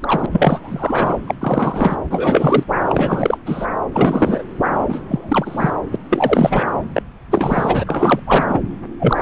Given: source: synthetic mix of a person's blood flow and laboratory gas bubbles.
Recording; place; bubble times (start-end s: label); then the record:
Doppler ultrasound of blood flow; subclavian vein
0.01-0.26 s: bubbles
0.30-1.17 s: bubbles
1.28-1.34 s: bubbles
1.40-1.97 s: bubbles
2.10-2.63 s: bubbles
2.88-3.38 s: bubbles
3.46-3.67 s: bubbles
3.92-4.45 s: bubbles
4.88-5.01 s: bubbles
5.08-5.72 s: bubbles
5.91-5.96 s: bubbles
6.09-6.67 s: bubbles
6.93-7.02 s: bubbles
7.30-7.83 s: bubbles
7.87-8.20 s: bubbles
8.26-8.46 s: bubbles
8.48-8.59 s: bubbles
8.99-9.22 s: bubbles
From the record:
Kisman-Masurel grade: 333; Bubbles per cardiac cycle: rolling drumbeat, 9 or more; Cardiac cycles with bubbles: 50 to 99%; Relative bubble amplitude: loud (0.450 to 0.775); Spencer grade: 3 (all of the cardiac periods contain showers or single bubble signals, but not dominating or overriding the cardiac motion signals); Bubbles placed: anywhere in the cardiac cycle